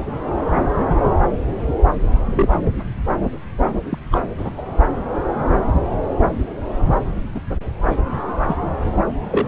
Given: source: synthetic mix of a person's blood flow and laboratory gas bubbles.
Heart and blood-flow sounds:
Doppler ultrasound of blood flow; subclavian vein
2.25-2.49 s: bubbles
3.90-3.98 s: bubbles
4.11-4.19 s: bubbles
4.38-4.50 s: bubbles
4.57-4.61 s: bubbles
7.31-7.40 s: bubbles
7.50-7.56 s: bubbles
8.48-8.55 s: bubbles
9.30-9.47 s: bubbles
From the record:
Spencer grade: 2 (many but less than half of the cardiac periods contain bubble signals, singularly or in groups); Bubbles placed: anywhere in the cardiac cycle

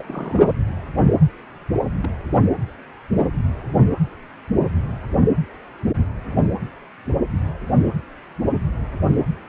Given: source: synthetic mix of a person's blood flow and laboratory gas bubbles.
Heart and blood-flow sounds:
Doppler ultrasound of blood flow; precordium
0.00-0.53 s: bubbles
2.00-2.10 s: bubbles
From the record:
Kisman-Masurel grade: 121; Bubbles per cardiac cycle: 1 to 2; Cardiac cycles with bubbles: 10 to 50%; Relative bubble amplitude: barely perceptible (0.100 to 0.250); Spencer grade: 2 (many but less than half of the cardiac periods contain bubble signals, singularly or in groups); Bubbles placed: anywhere in the cardiac cycle

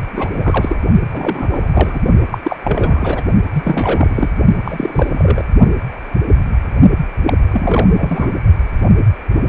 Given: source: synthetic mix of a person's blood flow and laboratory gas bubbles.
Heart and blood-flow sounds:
Doppler ultrasound of blood flow; precordium
0.13-0.77 s: bubbles
1.13-2.00 s: bubbles
2.31-2.38 s: bubbles
2.42-2.57 s: bubbles
2.63-3.22 s: bubbles
3.53-4.30 s: bubbles
4.65-5.44 s: bubbles
7.27-7.33 s: bubbles
7.51-7.87 s: bubbles
7.98-8.29 s: bubbles
From the record:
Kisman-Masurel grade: 332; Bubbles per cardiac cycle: rolling drumbeat, 9 or more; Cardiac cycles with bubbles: 50 to 99%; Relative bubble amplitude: moderate (0.250 to 0.450); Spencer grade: 3 (all of the cardiac periods contain showers or single bubble signals, but not dominating or overriding the cardiac motion signals); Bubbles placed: only in the low amplitude regions of the cardiac cycle

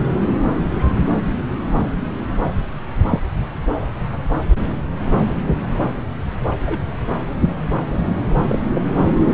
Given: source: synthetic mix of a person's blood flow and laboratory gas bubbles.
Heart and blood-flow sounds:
Doppler ultrasound of blood flow; subclavian vein
3.10-3.20 s: bubbles
6.65-6.79 s: bubbles
8.48-8.59 s: bubbles
8.75-8.82 s: bubbles
From the record:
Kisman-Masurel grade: 122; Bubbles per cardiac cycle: 1 to 2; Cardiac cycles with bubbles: 10 to 50%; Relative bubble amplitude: moderate (0.250 to 0.450); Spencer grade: 2 (many but less than half of the cardiac periods contain bubble signals, singularly or in groups); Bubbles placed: anywhere in the cardiac cycle

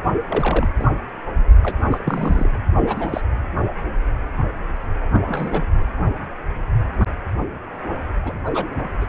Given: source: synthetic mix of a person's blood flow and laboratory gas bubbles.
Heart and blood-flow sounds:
Doppler ultrasound of blood flow; precordium
0.28-0.68 s: bubbles
0.78-0.90 s: bubbles
1.63-1.77 s: bubbles
1.91-2.48 s: bubbles
2.86-3.21 s: bubbles
5.12-5.22 s: bubbles
5.26-5.66 s: bubbles
8.24-8.33 s: bubbles
8.45-8.71 s: bubbles
8.76-8.88 s: bubbles
9.01-9.06 s: bubbles
From the record:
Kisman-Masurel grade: 232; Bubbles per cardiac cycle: several, 3 to 8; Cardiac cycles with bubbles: 50 to 99%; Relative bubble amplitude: moderate (0.250 to 0.450); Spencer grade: 3 (all of the cardiac periods contain showers or single bubble signals, but not dominating or overriding the cardiac motion signals); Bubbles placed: only in the low amplitude regions of the cardiac cycle

